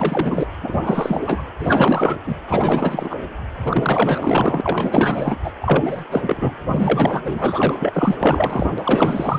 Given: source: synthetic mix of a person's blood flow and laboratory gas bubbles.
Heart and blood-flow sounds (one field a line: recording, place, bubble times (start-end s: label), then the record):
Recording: Doppler ultrasound of blood flow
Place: precordium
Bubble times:
0.00-0.47 s: bubbles
0.61-1.44 s: bubbles
1.58-2.17 s: bubbles
2.26-2.35 s: bubbles
2.47-3.16 s: bubbles
3.66-4.61 s: bubbles
4.63-5.37 s: bubbles
5.44-5.51 s: bubbles
5.61-6.04 s: bubbles
6.11-6.52 s: bubbles
6.68-8.16 s: bubbles
8.20-8.75 s: bubbles
8.78-9.39 s: bubbles
From the record:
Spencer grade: 4 (maximum detectable bubble signal sounding continuously throughout systole and diastole of every cardiac period, and overriding the amplitude of the normal cardiac signals)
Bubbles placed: anywhere in the cardiac cycle